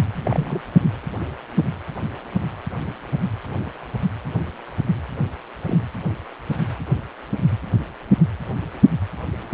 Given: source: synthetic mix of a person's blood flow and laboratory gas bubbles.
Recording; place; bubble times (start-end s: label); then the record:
Doppler ultrasound of blood flow; precordium
0.15-0.61 s: bubbles
5.67-5.82 s: bubbles
From the record:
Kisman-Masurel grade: 122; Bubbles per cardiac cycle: 1 to 2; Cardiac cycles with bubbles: 10 to 50%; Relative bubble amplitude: moderate (0.250 to 0.450); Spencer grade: 2 (many but less than half of the cardiac periods contain bubble signals, singularly or in groups); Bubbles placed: anywhere in the cardiac cycle